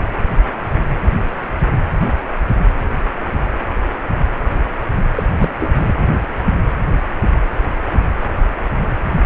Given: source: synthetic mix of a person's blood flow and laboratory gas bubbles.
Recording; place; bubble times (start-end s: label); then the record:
Doppler ultrasound of blood flow; precordium
5.16-5.24 s: bubbles
5.35-5.51 s: bubbles
5.59-5.71 s: bubbles
5.79-5.92 s: bubbles
From the record:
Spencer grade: 1 (occasional bubble signal discernible with the cardiac motion signal, with majority of cardiac periods free of bubbles); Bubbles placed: anywhere in the cardiac cycle